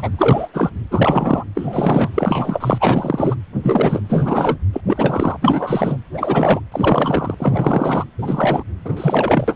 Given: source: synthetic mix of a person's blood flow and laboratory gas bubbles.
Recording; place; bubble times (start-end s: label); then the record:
Doppler ultrasound of blood flow; precordium
0.00-0.10 s: bubbles
0.18-0.48 s: bubbles
0.53-0.70 s: bubbles
0.91-1.44 s: bubbles
1.54-2.10 s: bubbles
2.14-3.35 s: bubbles
3.62-4.00 s: bubbles
4.08-4.58 s: bubbles
4.73-4.80 s: bubbles
4.87-5.37 s: bubbles
5.42-5.97 s: bubbles
6.13-6.60 s: bubbles
6.71-7.34 s: bubbles
7.39-8.04 s: bubbles
8.19-8.63 s: bubbles
8.85-9.55 s: bubbles
From the record:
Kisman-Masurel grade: 343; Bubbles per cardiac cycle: rolling drumbeat, 9 or more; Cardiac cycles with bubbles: 100%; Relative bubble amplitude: loud (0.450 to 0.775); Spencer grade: 3 (all of the cardiac periods contain showers or single bubble signals, but not dominating or overriding the cardiac motion signals); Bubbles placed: anywhere in the cardiac cycle